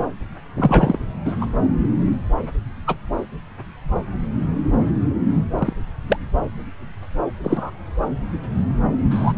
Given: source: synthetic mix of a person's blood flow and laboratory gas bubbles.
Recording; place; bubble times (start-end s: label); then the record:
Doppler ultrasound of blood flow; subclavian vein
0.56-0.98 s: bubbles
1.25-1.34 s: bubbles
1.41-1.46 s: bubbles
2.87-2.97 s: bubbles
5.58-5.73 s: bubbles
6.09-6.17 s: bubbles
7.44-7.72 s: bubbles
9.10-9.33 s: bubbles
From the record:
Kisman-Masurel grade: 123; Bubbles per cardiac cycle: 1 to 2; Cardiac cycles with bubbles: 10 to 50%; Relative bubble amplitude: loud (0.450 to 0.775); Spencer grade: 2 (many but less than half of the cardiac periods contain bubble signals, singularly or in groups); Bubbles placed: anywhere in the cardiac cycle